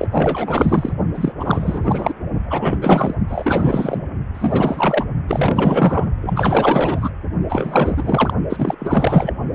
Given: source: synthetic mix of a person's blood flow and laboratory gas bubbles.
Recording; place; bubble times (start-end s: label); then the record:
Doppler ultrasound of blood flow; precordium
0.00-0.08 s: bubbles
0.11-0.93 s: bubbles
1.15-1.32 s: bubbles
1.39-2.14 s: bubbles
2.47-2.77 s: bubbles
2.81-3.15 s: bubbles
3.27-4.05 s: bubbles
4.34-5.05 s: bubbles
5.28-6.10 s: bubbles
6.21-7.10 s: bubbles
7.49-8.33 s: bubbles
8.49-9.33 s: bubbles
From the record:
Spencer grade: 4 (maximum detectable bubble signal sounding continuously throughout systole and diastole of every cardiac period, and overriding the amplitude of the normal cardiac signals); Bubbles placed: only in the low amplitude regions of the cardiac cycle